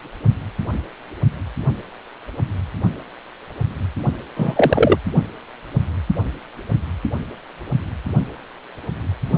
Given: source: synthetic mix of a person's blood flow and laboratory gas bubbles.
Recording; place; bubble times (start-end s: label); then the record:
Doppler ultrasound of blood flow; precordium
4.36-4.98 s: bubbles
From the record:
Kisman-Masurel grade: 113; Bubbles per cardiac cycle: 1 to 2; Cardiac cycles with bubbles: 1 to 10%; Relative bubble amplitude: loud (0.450 to 0.775); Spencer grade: 1 (occasional bubble signal discernible with the cardiac motion signal, with majority of cardiac periods free of bubbles); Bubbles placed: only in the low amplitude regions of the cardiac cycle